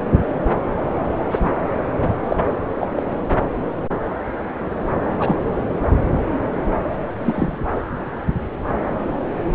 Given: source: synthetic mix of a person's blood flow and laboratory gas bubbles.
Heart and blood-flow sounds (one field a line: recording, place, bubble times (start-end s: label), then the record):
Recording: Doppler ultrasound of blood flow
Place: subclavian vein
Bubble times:
1.30-1.50 s: bubbles
2.29-2.36 s: bubbles
2.79-2.90 s: bubbles
2.96-3.02 s: bubbles
5.20-5.46 s: bubbles
7.24-7.58 s: bubbles
From the record:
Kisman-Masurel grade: 123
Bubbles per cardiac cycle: 1 to 2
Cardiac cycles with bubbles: 10 to 50%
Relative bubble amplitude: loud (0.450 to 0.775)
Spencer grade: 2 (many but less than half of the cardiac periods contain bubble signals, singularly or in groups)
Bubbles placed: anywhere in the cardiac cycle